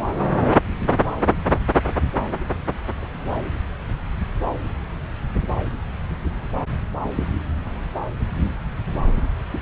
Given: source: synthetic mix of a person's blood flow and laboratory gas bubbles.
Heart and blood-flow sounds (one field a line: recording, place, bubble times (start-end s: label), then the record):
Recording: Doppler ultrasound of blood flow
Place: subclavian vein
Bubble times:
3.01-3.07 s: bubbles
From the record:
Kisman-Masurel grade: 121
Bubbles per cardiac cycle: 1 to 2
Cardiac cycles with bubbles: 10 to 50%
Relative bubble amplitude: barely perceptible (0.100 to 0.250)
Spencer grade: 2 (many but less than half of the cardiac periods contain bubble signals, singularly or in groups)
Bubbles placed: anywhere in the cardiac cycle